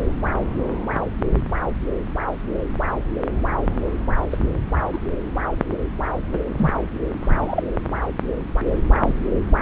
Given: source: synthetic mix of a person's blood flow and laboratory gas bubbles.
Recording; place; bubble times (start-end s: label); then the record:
Doppler ultrasound of blood flow; subclavian vein
4.31-4.38 s: bubbles
4.93-4.98 s: bubbles
6.32-6.38 s: bubbles
6.57-6.73 s: bubbles
7.22-7.64 s: bubbles
9.00-9.13 s: bubbles
From the record:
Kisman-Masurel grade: 122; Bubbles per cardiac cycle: 1 to 2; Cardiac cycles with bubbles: 10 to 50%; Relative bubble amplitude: moderate (0.250 to 0.450); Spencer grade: 2 (many but less than half of the cardiac periods contain bubble signals, singularly or in groups); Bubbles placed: anywhere in the cardiac cycle